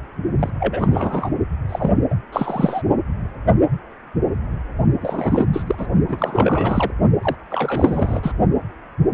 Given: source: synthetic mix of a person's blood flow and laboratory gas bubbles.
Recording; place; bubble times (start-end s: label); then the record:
Doppler ultrasound of blood flow; precordium
0.39-0.50 s: bubbles
0.59-1.29 s: bubbles
1.69-1.93 s: bubbles
2.10-2.16 s: bubbles
2.32-2.83 s: bubbles
5.01-5.46 s: bubbles
5.53-5.63 s: bubbles
5.67-5.75 s: bubbles
5.78-5.87 s: bubbles
6.08-6.91 s: bubbles
7.21-7.36 s: bubbles
7.50-8.32 s: bubbles
From the record:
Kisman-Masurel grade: 332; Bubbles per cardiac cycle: rolling drumbeat, 9 or more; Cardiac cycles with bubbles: 50 to 99%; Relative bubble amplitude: moderate (0.250 to 0.450); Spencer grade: 3 (all of the cardiac periods contain showers or single bubble signals, but not dominating or overriding the cardiac motion signals); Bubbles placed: only in the low amplitude regions of the cardiac cycle